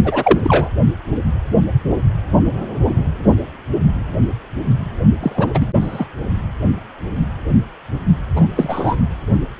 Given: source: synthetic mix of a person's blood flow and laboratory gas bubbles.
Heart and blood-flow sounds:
Doppler ultrasound of blood flow; precordium
0.04-0.40 s: bubbles
0.43-0.69 s: bubbles
5.20-5.66 s: bubbles
5.80-6.05 s: bubbles
8.36-8.47 s: bubbles
8.54-8.96 s: bubbles
From the record:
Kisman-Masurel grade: 223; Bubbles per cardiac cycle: several, 3 to 8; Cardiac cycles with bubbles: 10 to 50%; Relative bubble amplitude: loud (0.450 to 0.775); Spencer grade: 2 (many but less than half of the cardiac periods contain bubble signals, singularly or in groups); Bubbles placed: only in the low amplitude regions of the cardiac cycle

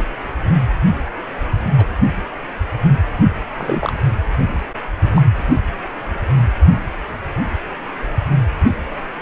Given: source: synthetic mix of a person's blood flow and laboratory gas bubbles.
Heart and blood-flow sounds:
Doppler ultrasound of blood flow; precordium
0.00-0.08 s: bubbles
1.77-1.86 s: bubbles
3.57-3.92 s: bubbles
5.15-5.24 s: bubbles
From the record:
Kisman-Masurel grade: 122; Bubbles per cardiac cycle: 1 to 2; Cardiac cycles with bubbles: 10 to 50%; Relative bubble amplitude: moderate (0.250 to 0.450); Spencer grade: 2 (many but less than half of the cardiac periods contain bubble signals, singularly or in groups); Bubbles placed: anywhere in the cardiac cycle

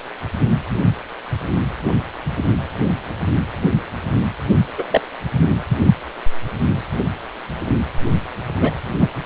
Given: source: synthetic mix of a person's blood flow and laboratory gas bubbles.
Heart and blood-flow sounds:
Doppler ultrasound of blood flow; precordium
4.77-4.84 s: bubbles
4.90-5.01 s: bubbles
8.61-8.72 s: bubbles
9.01-9.08 s: bubbles
From the record:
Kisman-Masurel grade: 123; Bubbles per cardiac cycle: 1 to 2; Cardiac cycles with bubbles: 10 to 50%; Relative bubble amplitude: loud (0.450 to 0.775); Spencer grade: 2 (many but less than half of the cardiac periods contain bubble signals, singularly or in groups); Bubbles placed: anywhere in the cardiac cycle

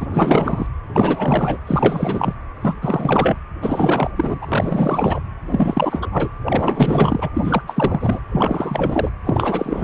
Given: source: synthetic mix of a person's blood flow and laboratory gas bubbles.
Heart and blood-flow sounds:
Doppler ultrasound of blood flow; precordium
0.00-0.07 s: bubbles
0.11-0.66 s: bubbles
0.93-1.57 s: bubbles
1.67-2.34 s: bubbles
2.61-2.76 s: bubbles
2.81-3.38 s: bubbles
3.61-4.10 s: bubbles
4.16-5.20 s: bubbles
5.50-6.08 s: bubbles
6.12-6.30 s: bubbles
6.46-7.30 s: bubbles
7.34-7.62 s: bubbles
7.67-8.20 s: bubbles
8.32-9.10 s: bubbles
9.25-9.84 s: bubbles
From the record:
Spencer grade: 4 (maximum detectable bubble signal sounding continuously throughout systole and diastole of every cardiac period, and overriding the amplitude of the normal cardiac signals); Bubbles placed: anywhere in the cardiac cycle

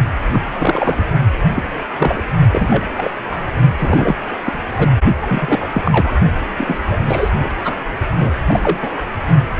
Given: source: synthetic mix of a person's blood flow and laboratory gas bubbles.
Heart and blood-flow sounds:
Doppler ultrasound of blood flow; precordium
0.32-0.40 s: bubbles
0.58-1.07 s: bubbles
1.54-1.63 s: bubbles
1.95-2.22 s: bubbles
2.52-2.92 s: bubbles
2.97-3.10 s: bubbles
3.30-3.53 s: bubbles
3.78-4.16 s: bubbles
4.45-4.59 s: bubbles
4.74-4.92 s: bubbles
5.21-5.69 s: bubbles
5.72-5.82 s: bubbles
5.85-6.13 s: bubbles
6.58-6.79 s: bubbles
6.88-6.99 s: bubbles
7.06-7.30 s: bubbles
7.42-7.54 s: bubbles
7.64-7.75 s: bubbles
8.12-8.34 s: bubbles
8.46-8.60 s: bubbles
8.63-8.78 s: bubbles
8.81-8.90 s: bubbles
From the record:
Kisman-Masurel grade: 242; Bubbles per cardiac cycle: several, 3 to 8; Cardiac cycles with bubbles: 100%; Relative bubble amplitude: moderate (0.250 to 0.450); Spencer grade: 3 (all of the cardiac periods contain showers or single bubble signals, but not dominating or overriding the cardiac motion signals); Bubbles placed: only in the low amplitude regions of the cardiac cycle

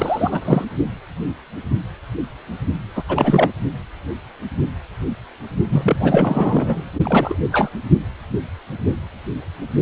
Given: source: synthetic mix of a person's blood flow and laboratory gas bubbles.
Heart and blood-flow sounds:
Doppler ultrasound of blood flow; precordium
0.00-0.41 s: bubbles
0.45-0.65 s: bubbles
2.95-3.04 s: bubbles
3.08-3.51 s: bubbles
5.69-6.88 s: bubbles
7.03-7.39 s: bubbles
7.52-7.70 s: bubbles
From the record:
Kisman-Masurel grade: 333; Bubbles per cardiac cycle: rolling drumbeat, 9 or more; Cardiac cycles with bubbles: 50 to 99%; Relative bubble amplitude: loud (0.450 to 0.775); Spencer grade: 3 (all of the cardiac periods contain showers or single bubble signals, but not dominating or overriding the cardiac motion signals); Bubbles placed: only in the low amplitude regions of the cardiac cycle

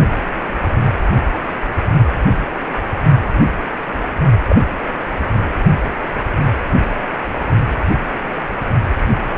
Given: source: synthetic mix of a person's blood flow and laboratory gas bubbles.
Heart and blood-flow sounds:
Doppler ultrasound of blood flow; precordium
4.48-4.61 s: bubbles
From the record:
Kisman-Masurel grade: 112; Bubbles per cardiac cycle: 1 to 2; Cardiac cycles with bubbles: 1 to 10%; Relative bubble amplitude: moderate (0.250 to 0.450); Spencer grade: 1 (occasional bubble signal discernible with the cardiac motion signal, with majority of cardiac periods free of bubbles); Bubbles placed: only in the low amplitude regions of the cardiac cycle

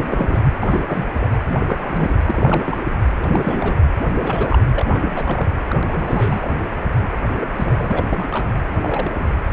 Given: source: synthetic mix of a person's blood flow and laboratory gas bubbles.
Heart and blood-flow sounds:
Doppler ultrasound of blood flow; precordium
0.00-0.43 s: bubbles
0.59-0.84 s: bubbles
0.87-1.10 s: bubbles
1.14-1.29 s: bubbles
1.32-1.37 s: bubbles
1.43-1.59 s: bubbles
1.67-2.13 s: bubbles
2.25-2.81 s: bubbles
3.23-3.75 s: bubbles
4.00-4.06 s: bubbles
4.14-4.58 s: bubbles
4.74-5.48 s: bubbles
5.70-5.75 s: bubbles
5.87-6.54 s: bubbles
7.12-7.16 s: bubbles
7.35-7.46 s: bubbles
7.55-8.08 s: bubbles
8.12-8.47 s: bubbles
8.77-9.12 s: bubbles
9.19-9.24 s: bubbles
9.49-9.53 s: bubbles
From the record:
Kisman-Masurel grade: 342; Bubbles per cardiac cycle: rolling drumbeat, 9 or more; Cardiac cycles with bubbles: 100%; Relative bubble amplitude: moderate (0.250 to 0.450); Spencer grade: 3 (all of the cardiac periods contain showers or single bubble signals, but not dominating or overriding the cardiac motion signals); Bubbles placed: anywhere in the cardiac cycle

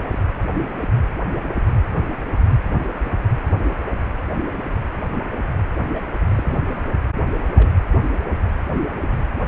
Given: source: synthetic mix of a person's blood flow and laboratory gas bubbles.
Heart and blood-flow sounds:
Doppler ultrasound of blood flow; precordium
0.10-0.18 s: bubbles
5.93-6.01 s: bubbles
6.29-6.58 s: bubbles
7.56-7.76 s: bubbles
From the record:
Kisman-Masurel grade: 121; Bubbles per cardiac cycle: 1 to 2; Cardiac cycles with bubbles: 10 to 50%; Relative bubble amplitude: barely perceptible (0.100 to 0.250); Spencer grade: 2 (many but less than half of the cardiac periods contain bubble signals, singularly or in groups); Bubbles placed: anywhere in the cardiac cycle

